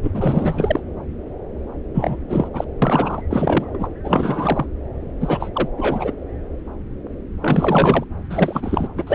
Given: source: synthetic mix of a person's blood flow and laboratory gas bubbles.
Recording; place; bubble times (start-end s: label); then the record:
Doppler ultrasound of blood flow; subclavian vein
0.03-0.11 s: bubbles
0.14-0.81 s: bubbles
1.94-2.16 s: bubbles
2.29-2.48 s: bubbles
2.53-2.65 s: bubbles
2.82-3.22 s: bubbles
3.30-3.88 s: bubbles
4.04-4.66 s: bubbles
5.20-5.50 s: bubbles
5.54-5.69 s: bubbles
5.77-6.12 s: bubbles
7.42-8.04 s: bubbles
8.29-8.88 s: bubbles
8.96-9.04 s: bubbles
9.06-9.15 s: bubbles
From the record:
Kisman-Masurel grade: 333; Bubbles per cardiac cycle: rolling drumbeat, 9 or more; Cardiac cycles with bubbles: 50 to 99%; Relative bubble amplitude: loud (0.450 to 0.775); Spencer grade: 3 (all of the cardiac periods contain showers or single bubble signals, but not dominating or overriding the cardiac motion signals); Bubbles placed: anywhere in the cardiac cycle